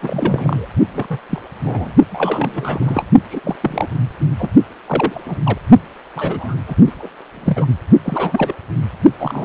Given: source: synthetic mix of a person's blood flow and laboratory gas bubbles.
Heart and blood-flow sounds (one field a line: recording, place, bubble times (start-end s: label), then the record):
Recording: Doppler ultrasound of blood flow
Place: precordium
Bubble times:
0.02-0.68 s: bubbles
0.93-1.06 s: bubbles
1.10-1.19 s: bubbles
1.29-1.42 s: bubbles
1.64-1.92 s: bubbles
2.10-3.04 s: bubbles
3.31-3.40 s: bubbles
3.44-3.56 s: bubbles
3.61-3.87 s: bubbles
4.39-4.50 s: bubbles
4.86-5.41 s: bubbles
5.44-5.58 s: bubbles
6.16-6.58 s: bubbles
6.67-6.78 s: bubbles
6.87-6.92 s: bubbles
6.99-7.08 s: bubbles
7.36-7.66 s: bubbles
8.04-8.53 s: bubbles
9.20-9.44 s: bubbles
From the record:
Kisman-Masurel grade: 242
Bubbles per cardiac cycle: several, 3 to 8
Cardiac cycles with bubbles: 100%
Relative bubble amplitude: moderate (0.250 to 0.450)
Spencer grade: 3 (all of the cardiac periods contain showers or single bubble signals, but not dominating or overriding the cardiac motion signals)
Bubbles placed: only in the low amplitude regions of the cardiac cycle